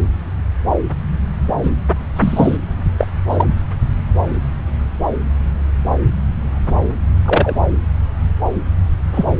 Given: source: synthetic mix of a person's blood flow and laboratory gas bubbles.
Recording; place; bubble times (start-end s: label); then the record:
Doppler ultrasound of blood flow; subclavian vein
1.62-1.71 s: bubbles
2.16-2.56 s: bubbles
2.98-3.07 s: bubbles
3.29-3.46 s: bubbles
7.25-7.55 s: bubbles
9.14-9.27 s: bubbles
From the record:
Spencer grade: 2 (many but less than half of the cardiac periods contain bubble signals, singularly or in groups); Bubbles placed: anywhere in the cardiac cycle